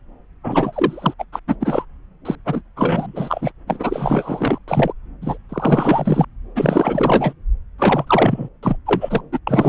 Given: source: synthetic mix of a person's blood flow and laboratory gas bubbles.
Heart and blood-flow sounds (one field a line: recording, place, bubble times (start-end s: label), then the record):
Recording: Doppler ultrasound of blood flow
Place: subclavian vein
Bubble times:
0.44-1.14 s: bubbles
1.18-1.24 s: bubbles
1.32-1.39 s: bubbles
1.47-1.55 s: bubbles
1.60-1.85 s: bubbles
2.25-2.35 s: bubbles
2.45-2.62 s: bubbles
2.76-3.52 s: bubbles
3.67-4.58 s: bubbles
4.67-4.92 s: bubbles
5.21-5.38 s: bubbles
5.49-6.25 s: bubbles
6.55-7.33 s: bubbles
7.78-8.49 s: bubbles
8.62-8.77 s: bubbles
8.86-9.21 s: bubbles
9.32-9.39 s: bubbles
9.47-9.68 s: bubbles
From the record:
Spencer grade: 4 (maximum detectable bubble signal sounding continuously throughout systole and diastole of every cardiac period, and overriding the amplitude of the normal cardiac signals)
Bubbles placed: anywhere in the cardiac cycle